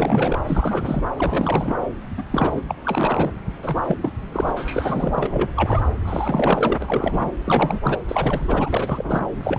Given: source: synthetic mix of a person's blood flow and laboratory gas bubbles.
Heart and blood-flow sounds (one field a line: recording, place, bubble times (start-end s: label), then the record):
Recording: Doppler ultrasound of blood flow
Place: subclavian vein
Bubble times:
0.00-0.38 s: bubbles
0.47-1.01 s: bubbles
1.17-1.74 s: bubbles
2.17-2.23 s: bubbles
2.32-2.60 s: bubbles
2.68-2.75 s: bubbles
2.85-3.31 s: bubbles
3.62-3.76 s: bubbles
3.86-3.96 s: bubbles
4.01-4.11 s: bubbles
4.32-4.51 s: bubbles
4.56-5.27 s: bubbles
5.30-5.48 s: bubbles
5.56-5.81 s: bubbles
6.04-6.78 s: bubbles
6.82-7.30 s: bubbles
7.44-7.79 s: bubbles
7.83-7.99 s: bubbles
8.07-8.70 s: bubbles
8.72-9.28 s: bubbles
9.42-9.59 s: bubbles
From the record:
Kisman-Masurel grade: 342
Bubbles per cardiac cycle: rolling drumbeat, 9 or more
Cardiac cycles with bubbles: 100%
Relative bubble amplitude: moderate (0.250 to 0.450)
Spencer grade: 3 (all of the cardiac periods contain showers or single bubble signals, but not dominating or overriding the cardiac motion signals)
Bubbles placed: anywhere in the cardiac cycle